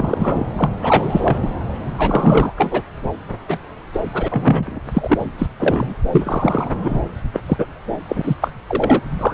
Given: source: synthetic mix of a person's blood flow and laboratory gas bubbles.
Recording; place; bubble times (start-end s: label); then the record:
Doppler ultrasound of blood flow; subclavian vein
0.00-0.45 s: bubbles
0.56-0.69 s: bubbles
0.81-1.39 s: bubbles
1.42-1.49 s: bubbles
1.97-2.52 s: bubbles
2.57-2.82 s: bubbles
3.49-3.58 s: bubbles
3.93-4.03 s: bubbles
4.12-4.80 s: bubbles
4.94-5.17 s: bubbles
5.38-5.46 s: bubbles
5.59-5.95 s: bubbles
6.12-6.70 s: bubbles
6.82-7.00 s: bubbles
7.33-7.40 s: bubbles
7.46-7.65 s: bubbles
8.09-8.35 s: bubbles
8.40-8.53 s: bubbles
8.68-9.01 s: bubbles
9.19-9.34 s: bubbles
From the record:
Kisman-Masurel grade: 233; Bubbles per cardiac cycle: several, 3 to 8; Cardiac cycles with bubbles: 50 to 99%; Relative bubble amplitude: loud (0.450 to 0.775); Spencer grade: 3 (all of the cardiac periods contain showers or single bubble signals, but not dominating or overriding the cardiac motion signals); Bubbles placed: anywhere in the cardiac cycle